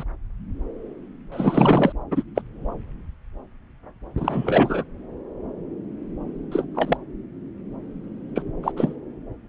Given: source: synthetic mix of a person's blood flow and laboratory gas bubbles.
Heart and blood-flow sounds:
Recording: Doppler ultrasound of blood flow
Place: subclavian vein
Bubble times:
0.00-0.04 s: bubbles
1.32-1.93 s: bubbles
2.11-2.23 s: bubbles
2.35-2.42 s: bubbles
4.17-4.83 s: bubbles
6.51-6.65 s: bubbles
6.74-6.97 s: bubbles
8.35-8.42 s: bubbles
8.63-8.72 s: bubbles
8.76-8.96 s: bubbles
From the record:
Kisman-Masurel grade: 222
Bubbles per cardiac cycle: several, 3 to 8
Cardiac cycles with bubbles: 10 to 50%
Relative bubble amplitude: moderate (0.250 to 0.450)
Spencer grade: 2 (many but less than half of the cardiac periods contain bubble signals, singularly or in groups)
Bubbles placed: anywhere in the cardiac cycle

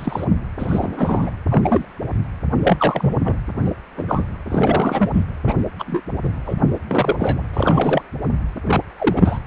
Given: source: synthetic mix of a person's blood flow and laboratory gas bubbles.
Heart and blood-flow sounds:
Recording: Doppler ultrasound of blood flow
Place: precordium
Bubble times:
0.00-0.25 s: bubbles
0.58-1.30 s: bubbles
1.49-1.85 s: bubbles
2.63-3.14 s: bubbles
3.25-3.36 s: bubbles
3.65-3.73 s: bubbles
3.97-4.04 s: bubbles
4.08-4.24 s: bubbles
4.49-5.10 s: bubbles
5.13-5.23 s: bubbles
5.46-5.54 s: bubbles
5.79-6.01 s: bubbles
6.23-6.29 s: bubbles
6.46-6.53 s: bubbles
6.87-7.43 s: bubbles
7.53-8.02 s: bubbles
8.65-8.81 s: bubbles
8.98-9.40 s: bubbles
From the record:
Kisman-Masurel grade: 243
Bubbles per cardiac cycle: several, 3 to 8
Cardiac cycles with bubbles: 100%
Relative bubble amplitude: loud (0.450 to 0.775)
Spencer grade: 3 (all of the cardiac periods contain showers or single bubble signals, but not dominating or overriding the cardiac motion signals)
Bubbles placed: anywhere in the cardiac cycle

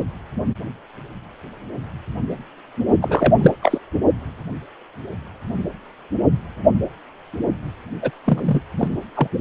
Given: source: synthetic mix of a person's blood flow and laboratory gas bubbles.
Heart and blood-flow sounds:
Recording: Doppler ultrasound of blood flow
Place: precordium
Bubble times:
3.02-3.54 s: bubbles
3.62-3.78 s: bubbles
8.01-8.10 s: bubbles
8.25-8.60 s: bubbles
8.77-8.88 s: bubbles
9.15-9.27 s: bubbles
From the record:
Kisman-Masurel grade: 223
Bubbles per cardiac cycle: several, 3 to 8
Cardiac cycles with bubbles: 10 to 50%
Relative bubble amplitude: loud (0.450 to 0.775)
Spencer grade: 2 (many but less than half of the cardiac periods contain bubble signals, singularly or in groups)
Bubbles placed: only in the low amplitude regions of the cardiac cycle

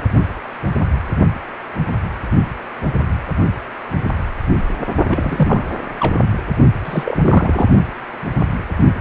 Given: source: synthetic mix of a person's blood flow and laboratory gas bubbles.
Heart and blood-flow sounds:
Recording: Doppler ultrasound of blood flow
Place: precordium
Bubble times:
5.09-5.67 s: bubbles
5.99-6.20 s: bubbles
6.85-7.18 s: bubbles
7.21-7.68 s: bubbles
From the record:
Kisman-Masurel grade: 222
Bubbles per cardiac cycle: several, 3 to 8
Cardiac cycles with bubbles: 10 to 50%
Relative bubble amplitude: moderate (0.250 to 0.450)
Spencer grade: 2 (many but less than half of the cardiac periods contain bubble signals, singularly or in groups)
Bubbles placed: only in the low amplitude regions of the cardiac cycle

